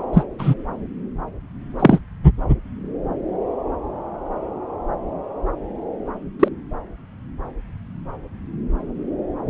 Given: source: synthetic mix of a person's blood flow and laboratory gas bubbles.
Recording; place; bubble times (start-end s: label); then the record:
Doppler ultrasound of blood flow; subclavian vein
0.13-0.23 s: bubbles
0.38-0.54 s: bubbles
1.79-1.99 s: bubbles
6.39-6.48 s: bubbles
From the record:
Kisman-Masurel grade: 123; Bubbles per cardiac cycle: 1 to 2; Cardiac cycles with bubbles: 10 to 50%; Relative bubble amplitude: loud (0.450 to 0.775); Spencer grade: 2 (many but less than half of the cardiac periods contain bubble signals, singularly or in groups); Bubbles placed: anywhere in the cardiac cycle